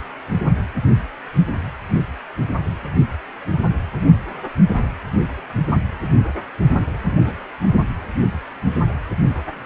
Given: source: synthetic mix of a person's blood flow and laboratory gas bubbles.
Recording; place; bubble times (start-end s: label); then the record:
Doppler ultrasound of blood flow; precordium
6.94-7.33 s: bubbles
From the record:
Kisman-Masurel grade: 111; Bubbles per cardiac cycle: 1 to 2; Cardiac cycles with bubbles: 1 to 10%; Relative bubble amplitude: barely perceptible (0.100 to 0.250); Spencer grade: 1 (occasional bubble signal discernible with the cardiac motion signal, with majority of cardiac periods free of bubbles); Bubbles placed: only in the low amplitude regions of the cardiac cycle